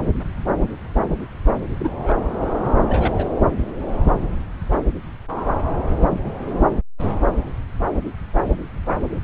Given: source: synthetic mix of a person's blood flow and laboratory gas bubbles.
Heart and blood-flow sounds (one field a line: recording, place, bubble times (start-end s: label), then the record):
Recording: Doppler ultrasound of blood flow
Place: subclavian vein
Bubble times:
1.79-2.13 s: bubbles
2.87-3.27 s: bubbles
From the record:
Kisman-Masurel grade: 122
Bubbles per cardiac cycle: 1 to 2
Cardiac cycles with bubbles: 10 to 50%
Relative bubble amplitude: moderate (0.250 to 0.450)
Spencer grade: 2 (many but less than half of the cardiac periods contain bubble signals, singularly or in groups)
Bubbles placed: anywhere in the cardiac cycle